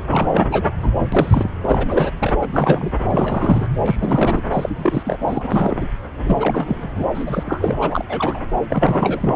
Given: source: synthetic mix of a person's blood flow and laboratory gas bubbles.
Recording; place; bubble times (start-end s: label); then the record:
Doppler ultrasound of blood flow; subclavian vein
0.08-0.66 s: bubbles
0.80-0.91 s: bubbles
1.12-1.50 s: bubbles
1.63-2.12 s: bubbles
2.20-2.36 s: bubbles
2.40-2.92 s: bubbles
3.10-3.66 s: bubbles
3.85-3.96 s: bubbles
3.99-4.45 s: bubbles
4.52-4.70 s: bubbles
4.76-5.18 s: bubbles
5.27-5.87 s: bubbles
6.23-6.90 s: bubbles
6.95-7.05 s: bubbles
7.14-7.43 s: bubbles
7.46-7.76 s: bubbles
7.80-8.05 s: bubbles
8.09-8.40 s: bubbles
8.68-9.35 s: bubbles
From the record:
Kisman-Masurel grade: 343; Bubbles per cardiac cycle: rolling drumbeat, 9 or more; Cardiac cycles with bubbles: 100%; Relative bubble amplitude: loud (0.450 to 0.775); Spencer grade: 3 (all of the cardiac periods contain showers or single bubble signals, but not dominating or overriding the cardiac motion signals); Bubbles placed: anywhere in the cardiac cycle